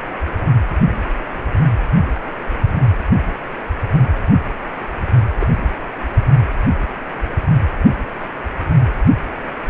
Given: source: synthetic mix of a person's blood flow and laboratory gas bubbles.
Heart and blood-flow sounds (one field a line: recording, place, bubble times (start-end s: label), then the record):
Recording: Doppler ultrasound of blood flow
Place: precordium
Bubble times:
5.40-5.46 s: bubbles
From the record:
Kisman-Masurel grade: 111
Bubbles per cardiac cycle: 1 to 2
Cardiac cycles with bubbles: 1 to 10%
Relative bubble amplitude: barely perceptible (0.100 to 0.250)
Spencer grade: 1 (occasional bubble signal discernible with the cardiac motion signal, with majority of cardiac periods free of bubbles)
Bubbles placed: anywhere in the cardiac cycle